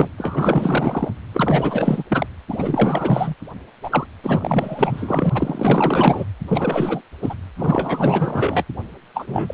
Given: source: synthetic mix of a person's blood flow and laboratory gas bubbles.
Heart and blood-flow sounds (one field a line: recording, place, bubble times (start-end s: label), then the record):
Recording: Doppler ultrasound of blood flow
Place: precordium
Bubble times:
0.00-0.09 s: bubbles
0.17-1.16 s: bubbles
1.32-2.04 s: bubbles
2.09-2.27 s: bubbles
2.48-3.35 s: bubbles
3.83-4.06 s: bubbles
4.23-5.29 s: bubbles
5.34-6.25 s: bubbles
6.48-7.01 s: bubbles
7.21-7.35 s: bubbles
7.56-8.64 s: bubbles
9.15-9.54 s: bubbles
From the record:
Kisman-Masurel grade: 444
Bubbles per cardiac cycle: continuous sound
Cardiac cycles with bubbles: 100%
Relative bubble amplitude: maximal (0.775 to 0.999)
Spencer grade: 4 (maximum detectable bubble signal sounding continuously throughout systole and diastole of every cardiac period, and overriding the amplitude of the normal cardiac signals)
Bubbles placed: anywhere in the cardiac cycle